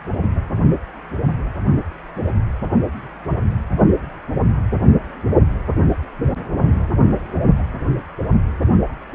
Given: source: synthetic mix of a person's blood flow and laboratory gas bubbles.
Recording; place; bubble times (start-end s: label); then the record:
Doppler ultrasound of blood flow; precordium
no bubbles
From the record:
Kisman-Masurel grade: 000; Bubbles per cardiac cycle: 0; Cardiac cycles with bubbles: 0%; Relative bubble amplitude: no bubbles discernible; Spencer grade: 0 (complete lack of bubble signals)